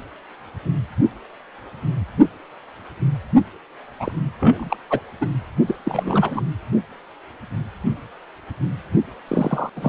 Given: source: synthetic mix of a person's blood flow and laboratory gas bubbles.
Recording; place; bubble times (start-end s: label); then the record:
Doppler ultrasound of blood flow; precordium
3.99-4.12 s: bubbles
4.40-4.77 s: bubbles
4.90-5.00 s: bubbles
5.21-5.27 s: bubbles
5.66-5.76 s: bubbles
5.85-6.42 s: bubbles
9.28-9.70 s: bubbles
9.75-9.89 s: bubbles
From the record:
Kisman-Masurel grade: 222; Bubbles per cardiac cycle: several, 3 to 8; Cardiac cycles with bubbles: 10 to 50%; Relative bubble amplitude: moderate (0.250 to 0.450); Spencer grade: 2 (many but less than half of the cardiac periods contain bubble signals, singularly or in groups); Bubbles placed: only in the low amplitude regions of the cardiac cycle